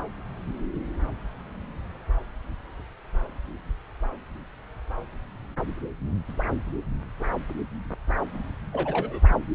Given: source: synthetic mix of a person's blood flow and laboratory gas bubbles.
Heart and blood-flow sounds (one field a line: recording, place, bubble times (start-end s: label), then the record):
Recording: Doppler ultrasound of blood flow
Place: subclavian vein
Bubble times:
8.72-9.20 s: bubbles
From the record:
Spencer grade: 1 (occasional bubble signal discernible with the cardiac motion signal, with majority of cardiac periods free of bubbles)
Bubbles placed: anywhere in the cardiac cycle